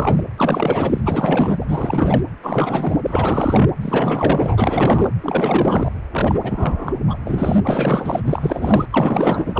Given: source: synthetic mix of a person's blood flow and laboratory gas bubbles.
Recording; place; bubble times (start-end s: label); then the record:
Doppler ultrasound of blood flow; precordium
0.00-0.24 s: bubbles
0.37-1.01 s: bubbles
1.04-1.65 s: bubbles
1.68-2.22 s: bubbles
2.42-3.00 s: bubbles
3.07-3.71 s: bubbles
3.81-5.10 s: bubbles
5.21-5.90 s: bubbles
6.12-6.94 s: bubbles
7.08-7.18 s: bubbles
7.26-7.60 s: bubbles
7.63-8.22 s: bubbles
8.25-8.86 s: bubbles
8.90-9.60 s: bubbles
From the record:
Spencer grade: 4 (maximum detectable bubble signal sounding continuously throughout systole and diastole of every cardiac period, and overriding the amplitude of the normal cardiac signals); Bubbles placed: anywhere in the cardiac cycle